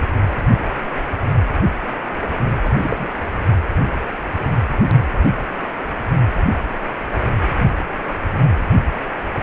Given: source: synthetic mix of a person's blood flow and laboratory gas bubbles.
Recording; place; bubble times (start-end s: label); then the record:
Doppler ultrasound of blood flow; precordium
2.64-2.76 s: bubbles
2.81-3.08 s: bubbles
From the record:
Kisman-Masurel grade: 212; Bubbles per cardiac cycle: several, 3 to 8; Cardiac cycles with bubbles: 1 to 10%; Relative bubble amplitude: moderate (0.250 to 0.450); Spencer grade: 1 (occasional bubble signal discernible with the cardiac motion signal, with majority of cardiac periods free of bubbles); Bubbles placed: anywhere in the cardiac cycle